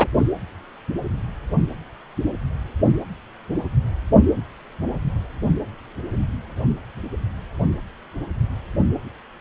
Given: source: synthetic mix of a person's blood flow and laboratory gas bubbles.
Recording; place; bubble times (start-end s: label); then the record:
Doppler ultrasound of blood flow; precordium
0.00-0.07 s: bubbles
From the record:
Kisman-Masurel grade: 213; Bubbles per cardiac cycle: several, 3 to 8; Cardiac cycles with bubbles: 1 to 10%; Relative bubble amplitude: loud (0.450 to 0.775); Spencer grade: 1 (occasional bubble signal discernible with the cardiac motion signal, with majority of cardiac periods free of bubbles); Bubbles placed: only in the low amplitude regions of the cardiac cycle